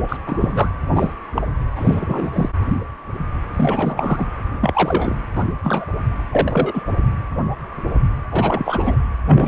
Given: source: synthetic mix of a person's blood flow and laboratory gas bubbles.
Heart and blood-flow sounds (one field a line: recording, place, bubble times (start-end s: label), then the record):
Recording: Doppler ultrasound of blood flow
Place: precordium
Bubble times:
0.08-0.17 s: bubbles
0.27-0.69 s: bubbles
0.95-1.14 s: bubbles
1.35-1.42 s: bubbles
1.76-2.30 s: bubbles
2.33-2.49 s: bubbles
3.54-4.26 s: bubbles
4.60-5.19 s: bubbles
5.34-5.44 s: bubbles
5.63-5.85 s: bubbles
6.32-6.84 s: bubbles
8.31-8.96 s: bubbles
9.26-9.48 s: bubbles
From the record:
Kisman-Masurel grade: 232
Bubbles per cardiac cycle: several, 3 to 8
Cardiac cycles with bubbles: 50 to 99%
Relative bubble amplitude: moderate (0.250 to 0.450)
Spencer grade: 3 (all of the cardiac periods contain showers or single bubble signals, but not dominating or overriding the cardiac motion signals)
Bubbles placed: anywhere in the cardiac cycle